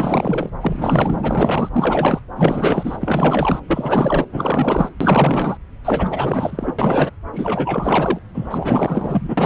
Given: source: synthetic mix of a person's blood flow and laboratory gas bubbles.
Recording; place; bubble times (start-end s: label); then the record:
Doppler ultrasound of blood flow; subclavian vein
0.00-0.50 s: bubbles
0.61-1.17 s: bubbles
1.22-1.69 s: bubbles
1.73-2.22 s: bubbles
2.36-3.60 s: bubbles
3.67-4.26 s: bubbles
4.32-4.89 s: bubbles
5.01-5.58 s: bubbles
5.84-6.76 s: bubbles
6.79-7.11 s: bubbles
7.33-8.19 s: bubbles
8.34-9.46 s: bubbles
From the record:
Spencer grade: 4 (maximum detectable bubble signal sounding continuously throughout systole and diastole of every cardiac period, and overriding the amplitude of the normal cardiac signals); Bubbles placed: anywhere in the cardiac cycle